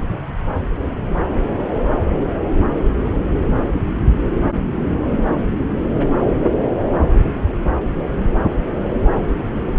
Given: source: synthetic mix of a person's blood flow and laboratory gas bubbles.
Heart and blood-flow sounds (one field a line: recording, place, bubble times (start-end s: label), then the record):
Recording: Doppler ultrasound of blood flow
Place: subclavian vein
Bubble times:
no bubbles
From the record:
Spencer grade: 0 (complete lack of bubble signals)